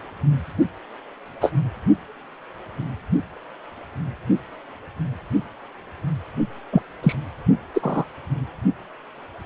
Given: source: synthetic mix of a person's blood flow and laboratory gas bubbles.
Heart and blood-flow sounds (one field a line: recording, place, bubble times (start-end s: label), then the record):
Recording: Doppler ultrasound of blood flow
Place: precordium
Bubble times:
1.41-1.52 s: bubbles
6.72-6.82 s: bubbles
7.02-7.15 s: bubbles
7.74-8.04 s: bubbles
From the record:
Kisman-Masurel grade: 123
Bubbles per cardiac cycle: 1 to 2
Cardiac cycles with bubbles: 10 to 50%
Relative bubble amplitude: loud (0.450 to 0.775)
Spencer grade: 2 (many but less than half of the cardiac periods contain bubble signals, singularly or in groups)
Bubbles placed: anywhere in the cardiac cycle